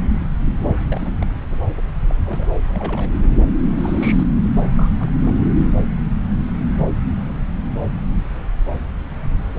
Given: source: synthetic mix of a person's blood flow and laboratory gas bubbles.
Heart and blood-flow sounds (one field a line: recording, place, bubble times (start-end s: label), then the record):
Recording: Doppler ultrasound of blood flow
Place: subclavian vein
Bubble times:
0.78-0.85 s: bubbles
0.88-1.13 s: bubbles
1.21-1.25 s: bubbles
2.07-2.15 s: bubbles
2.25-2.47 s: bubbles
2.68-3.10 s: bubbles
3.78-4.27 s: bubbles
4.53-4.62 s: bubbles
4.74-4.90 s: bubbles
4.94-5.11 s: bubbles
5.19-5.36 s: bubbles
From the record:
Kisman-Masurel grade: 221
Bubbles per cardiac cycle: several, 3 to 8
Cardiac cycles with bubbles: 10 to 50%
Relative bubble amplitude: barely perceptible (0.100 to 0.250)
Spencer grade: 2 (many but less than half of the cardiac periods contain bubble signals, singularly or in groups)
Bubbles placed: anywhere in the cardiac cycle